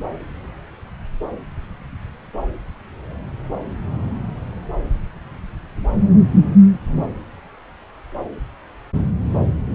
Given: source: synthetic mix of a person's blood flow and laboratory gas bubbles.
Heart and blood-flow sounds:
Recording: Doppler ultrasound of blood flow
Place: subclavian vein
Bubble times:
no bubbles
From the record:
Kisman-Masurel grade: 000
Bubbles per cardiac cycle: 0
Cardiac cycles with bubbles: 0%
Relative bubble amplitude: no bubbles discernible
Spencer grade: 0 (complete lack of bubble signals)

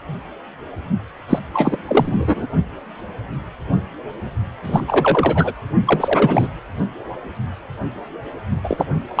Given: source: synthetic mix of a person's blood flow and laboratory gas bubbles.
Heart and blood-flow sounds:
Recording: Doppler ultrasound of blood flow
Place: precordium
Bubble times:
1.29-1.39 s: bubbles
1.54-1.78 s: bubbles
1.87-2.48 s: bubbles
4.64-4.85 s: bubbles
4.87-5.52 s: bubbles
5.86-6.49 s: bubbles
8.63-8.85 s: bubbles
9.15-9.20 s: bubbles
From the record:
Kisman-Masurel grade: 233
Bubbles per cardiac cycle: several, 3 to 8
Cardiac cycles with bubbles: 50 to 99%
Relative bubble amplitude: loud (0.450 to 0.775)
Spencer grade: 3 (all of the cardiac periods contain showers or single bubble signals, but not dominating or overriding the cardiac motion signals)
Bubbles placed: only in the low amplitude regions of the cardiac cycle

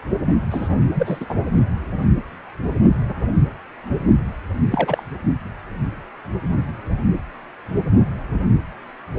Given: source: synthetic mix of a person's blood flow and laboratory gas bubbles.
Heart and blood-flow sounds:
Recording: Doppler ultrasound of blood flow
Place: precordium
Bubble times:
0.27-0.34 s: bubbles
0.51-0.76 s: bubbles
0.94-1.26 s: bubbles
1.29-1.35 s: bubbles
4.71-5.03 s: bubbles
From the record:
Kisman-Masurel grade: 222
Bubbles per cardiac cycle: several, 3 to 8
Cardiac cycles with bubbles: 10 to 50%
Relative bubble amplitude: moderate (0.250 to 0.450)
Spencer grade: 2 (many but less than half of the cardiac periods contain bubble signals, singularly or in groups)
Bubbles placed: anywhere in the cardiac cycle

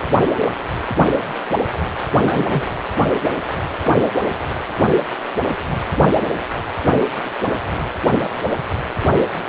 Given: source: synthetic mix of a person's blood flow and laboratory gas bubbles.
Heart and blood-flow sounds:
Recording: Doppler ultrasound of blood flow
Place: precordium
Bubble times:
2.21-2.66 s: bubbles
From the record:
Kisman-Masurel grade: 122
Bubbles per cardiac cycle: 1 to 2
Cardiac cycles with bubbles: 10 to 50%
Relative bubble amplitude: moderate (0.250 to 0.450)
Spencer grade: 2 (many but less than half of the cardiac periods contain bubble signals, singularly or in groups)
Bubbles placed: anywhere in the cardiac cycle

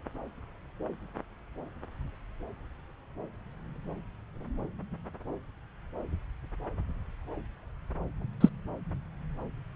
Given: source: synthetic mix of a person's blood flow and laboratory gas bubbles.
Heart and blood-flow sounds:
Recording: Doppler ultrasound of blood flow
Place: subclavian vein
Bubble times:
8.40-8.49 s: bubbles
From the record:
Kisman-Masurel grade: 113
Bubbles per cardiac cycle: 1 to 2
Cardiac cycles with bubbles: 1 to 10%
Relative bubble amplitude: loud (0.450 to 0.775)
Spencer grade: 1 (occasional bubble signal discernible with the cardiac motion signal, with majority of cardiac periods free of bubbles)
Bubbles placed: anywhere in the cardiac cycle

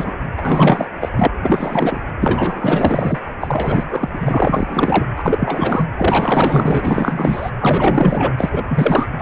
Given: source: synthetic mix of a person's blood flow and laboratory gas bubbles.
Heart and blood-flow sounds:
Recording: Doppler ultrasound of blood flow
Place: precordium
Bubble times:
0.00-0.12 s: bubbles
0.37-0.88 s: bubbles
1.00-1.09 s: bubbles
1.16-1.28 s: bubbles
1.42-2.01 s: bubbles
2.19-3.19 s: bubbles
3.40-3.85 s: bubbles
3.88-4.10 s: bubbles
4.13-5.05 s: bubbles
5.16-5.88 s: bubbles
5.96-7.51 s: bubbles
7.60-8.33 s: bubbles
8.38-8.64 s: bubbles
8.68-9.07 s: bubbles
9.19-9.22 s: bubbles
From the record:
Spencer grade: 4 (maximum detectable bubble signal sounding continuously throughout systole and diastole of every cardiac period, and overriding the amplitude of the normal cardiac signals)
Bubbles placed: anywhere in the cardiac cycle

